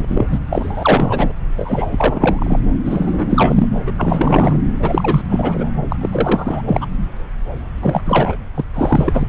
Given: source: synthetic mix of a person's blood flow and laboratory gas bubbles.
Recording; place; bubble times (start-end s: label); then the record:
Doppler ultrasound of blood flow; subclavian vein
0.00-0.25 s: bubbles
0.30-0.39 s: bubbles
0.49-1.33 s: bubbles
1.55-2.60 s: bubbles
2.85-3.67 s: bubbles
3.86-3.92 s: bubbles
3.97-4.56 s: bubbles
4.82-5.21 s: bubbles
5.29-5.71 s: bubbles
5.88-5.96 s: bubbles
6.00-6.62 s: bubbles
6.67-6.87 s: bubbles
7.81-8.02 s: bubbles
8.05-8.36 s: bubbles
8.54-8.65 s: bubbles
8.73-9.27 s: bubbles
From the record:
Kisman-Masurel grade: 343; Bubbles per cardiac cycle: rolling drumbeat, 9 or more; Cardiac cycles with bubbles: 100%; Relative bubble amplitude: loud (0.450 to 0.775); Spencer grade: 3 (all of the cardiac periods contain showers or single bubble signals, but not dominating or overriding the cardiac motion signals); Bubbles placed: anywhere in the cardiac cycle